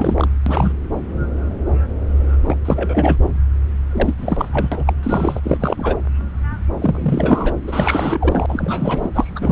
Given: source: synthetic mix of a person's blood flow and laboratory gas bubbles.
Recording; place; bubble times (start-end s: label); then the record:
Doppler ultrasound of blood flow; subclavian vein
0.00-0.28 s: bubbles
0.46-0.72 s: bubbles
2.48-2.55 s: bubbles
2.65-3.17 s: bubbles
3.92-4.15 s: bubbles
4.17-4.48 s: bubbles
4.53-4.69 s: bubbles
4.71-4.93 s: bubbles
5.03-5.40 s: bubbles
5.43-5.58 s: bubbles
5.60-5.96 s: bubbles
6.81-7.53 s: bubbles
7.67-8.46 s: bubbles
8.48-9.10 s: bubbles
9.15-9.52 s: bubbles
From the record:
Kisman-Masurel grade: 332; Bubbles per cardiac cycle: rolling drumbeat, 9 or more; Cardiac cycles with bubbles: 50 to 99%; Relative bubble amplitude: moderate (0.250 to 0.450); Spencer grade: 3 (all of the cardiac periods contain showers or single bubble signals, but not dominating or overriding the cardiac motion signals); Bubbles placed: anywhere in the cardiac cycle